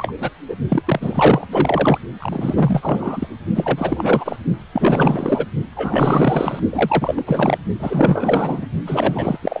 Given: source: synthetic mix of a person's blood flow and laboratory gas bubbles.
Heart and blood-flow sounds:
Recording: Doppler ultrasound of blood flow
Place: precordium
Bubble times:
0.00-0.12 s: bubbles
0.20-0.31 s: bubbles
0.47-0.56 s: bubbles
0.68-0.82 s: bubbles
0.85-1.48 s: bubbles
1.52-1.98 s: bubbles
2.20-3.27 s: bubbles
3.54-4.37 s: bubbles
4.72-5.46 s: bubbles
5.75-6.59 s: bubbles
6.70-7.58 s: bubbles
7.79-8.66 s: bubbles
8.87-9.38 s: bubbles
9.43-9.60 s: bubbles
From the record:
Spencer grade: 4 (maximum detectable bubble signal sounding continuously throughout systole and diastole of every cardiac period, and overriding the amplitude of the normal cardiac signals)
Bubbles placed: only in the low amplitude regions of the cardiac cycle

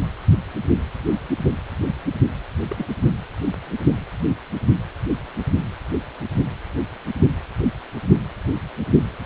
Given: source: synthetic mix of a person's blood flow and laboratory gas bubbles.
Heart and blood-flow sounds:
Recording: Doppler ultrasound of blood flow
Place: precordium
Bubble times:
2.71-2.86 s: bubbles
From the record:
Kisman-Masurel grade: 111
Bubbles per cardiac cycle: 1 to 2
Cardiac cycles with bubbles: 1 to 10%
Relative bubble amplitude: barely perceptible (0.100 to 0.250)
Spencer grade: 1 (occasional bubble signal discernible with the cardiac motion signal, with majority of cardiac periods free of bubbles)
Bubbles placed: only in the low amplitude regions of the cardiac cycle

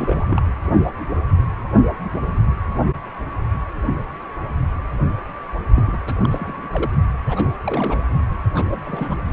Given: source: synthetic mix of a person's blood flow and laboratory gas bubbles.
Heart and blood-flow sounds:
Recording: Doppler ultrasound of blood flow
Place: precordium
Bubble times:
0.00-0.43 s: bubbles
5.73-5.98 s: bubbles
6.07-6.15 s: bubbles
6.24-6.91 s: bubbles
7.25-7.49 s: bubbles
7.62-8.01 s: bubbles
8.54-8.65 s: bubbles
8.71-8.81 s: bubbles
8.84-9.17 s: bubbles
From the record:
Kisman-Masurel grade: 221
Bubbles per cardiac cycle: several, 3 to 8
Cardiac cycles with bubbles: 10 to 50%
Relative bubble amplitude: barely perceptible (0.100 to 0.250)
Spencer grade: 2 (many but less than half of the cardiac periods contain bubble signals, singularly or in groups)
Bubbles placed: only in the low amplitude regions of the cardiac cycle

